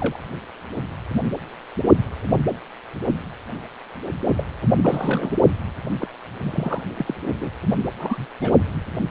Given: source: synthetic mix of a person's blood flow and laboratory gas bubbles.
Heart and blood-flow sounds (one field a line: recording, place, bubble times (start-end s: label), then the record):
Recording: Doppler ultrasound of blood flow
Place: precordium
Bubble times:
0.00-0.17 s: bubbles
4.36-4.45 s: bubbles
4.83-5.30 s: bubbles
6.00-6.07 s: bubbles
6.42-6.82 s: bubbles
6.96-7.14 s: bubbles
7.39-7.50 s: bubbles
7.98-8.26 s: bubbles
8.41-8.52 s: bubbles
From the record:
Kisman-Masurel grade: 232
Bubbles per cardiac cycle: several, 3 to 8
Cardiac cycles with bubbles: 50 to 99%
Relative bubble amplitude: moderate (0.250 to 0.450)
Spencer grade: 3 (all of the cardiac periods contain showers or single bubble signals, but not dominating or overriding the cardiac motion signals)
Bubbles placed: only in the low amplitude regions of the cardiac cycle